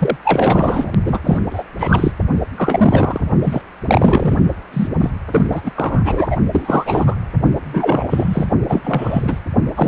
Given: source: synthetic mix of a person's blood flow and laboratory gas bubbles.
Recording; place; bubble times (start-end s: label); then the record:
Doppler ultrasound of blood flow; precordium
0.00-0.16 s: bubbles
0.24-0.91 s: bubbles
1.04-1.20 s: bubbles
1.24-1.39 s: bubbles
1.50-1.63 s: bubbles
1.78-2.12 s: bubbles
2.57-3.21 s: bubbles
3.43-3.62 s: bubbles
3.85-4.38 s: bubbles
4.73-4.88 s: bubbles
5.00-5.10 s: bubbles
5.30-5.47 s: bubbles
5.50-5.71 s: bubbles
5.76-6.37 s: bubbles
6.51-7.15 s: bubbles
7.65-8.46 s: bubbles
8.69-8.81 s: bubbles
8.84-9.39 s: bubbles
9.75-9.88 s: bubbles
From the record:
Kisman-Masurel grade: 343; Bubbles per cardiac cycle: rolling drumbeat, 9 or more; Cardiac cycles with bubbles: 100%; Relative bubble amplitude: loud (0.450 to 0.775); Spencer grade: 3 (all of the cardiac periods contain showers or single bubble signals, but not dominating or overriding the cardiac motion signals); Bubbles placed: only in the low amplitude regions of the cardiac cycle